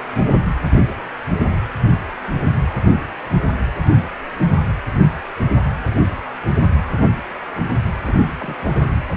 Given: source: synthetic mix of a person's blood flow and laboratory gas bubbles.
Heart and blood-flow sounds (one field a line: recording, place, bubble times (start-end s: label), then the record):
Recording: Doppler ultrasound of blood flow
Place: precordium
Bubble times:
8.05-8.13 s: bubbles
8.39-8.55 s: bubbles
8.72-8.92 s: bubbles
From the record:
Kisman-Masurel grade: 221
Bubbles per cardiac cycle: several, 3 to 8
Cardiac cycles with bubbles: 10 to 50%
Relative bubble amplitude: barely perceptible (0.100 to 0.250)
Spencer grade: 2 (many but less than half of the cardiac periods contain bubble signals, singularly or in groups)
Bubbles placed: anywhere in the cardiac cycle